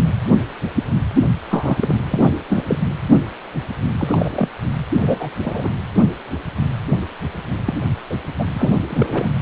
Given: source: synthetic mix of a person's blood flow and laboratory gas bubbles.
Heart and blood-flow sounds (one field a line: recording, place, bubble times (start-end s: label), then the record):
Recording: Doppler ultrasound of blood flow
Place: precordium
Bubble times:
1.15-1.28 s: bubbles
1.50-1.98 s: bubbles
2.10-2.34 s: bubbles
2.49-2.64 s: bubbles
2.68-2.78 s: bubbles
3.98-4.48 s: bubbles
5.00-5.29 s: bubbles
5.42-5.69 s: bubbles
7.65-7.77 s: bubbles
8.10-8.15 s: bubbles
8.38-8.45 s: bubbles
8.53-9.29 s: bubbles
From the record:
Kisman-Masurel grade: 232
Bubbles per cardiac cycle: several, 3 to 8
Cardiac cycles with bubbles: 50 to 99%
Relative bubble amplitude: moderate (0.250 to 0.450)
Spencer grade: 3 (all of the cardiac periods contain showers or single bubble signals, but not dominating or overriding the cardiac motion signals)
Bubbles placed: anywhere in the cardiac cycle